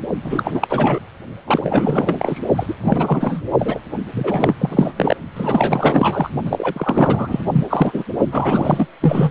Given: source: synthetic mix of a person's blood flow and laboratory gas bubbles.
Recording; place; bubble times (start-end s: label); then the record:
Doppler ultrasound of blood flow; precordium
0.23-1.00 s: bubbles
1.47-2.41 s: bubbles
2.56-2.75 s: bubbles
2.82-3.42 s: bubbles
3.58-3.79 s: bubbles
4.12-4.55 s: bubbles
4.58-5.17 s: bubbles
5.33-6.30 s: bubbles
6.44-7.46 s: bubbles
7.52-7.64 s: bubbles
7.70-8.04 s: bubbles
8.31-8.87 s: bubbles
9.00-9.31 s: bubbles
From the record:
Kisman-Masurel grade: 444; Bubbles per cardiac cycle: continuous sound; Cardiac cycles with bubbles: 100%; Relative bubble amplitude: maximal (0.775 to 0.999); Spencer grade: 4 (maximum detectable bubble signal sounding continuously throughout systole and diastole of every cardiac period, and overriding the amplitude of the normal cardiac signals); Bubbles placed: only in the low amplitude regions of the cardiac cycle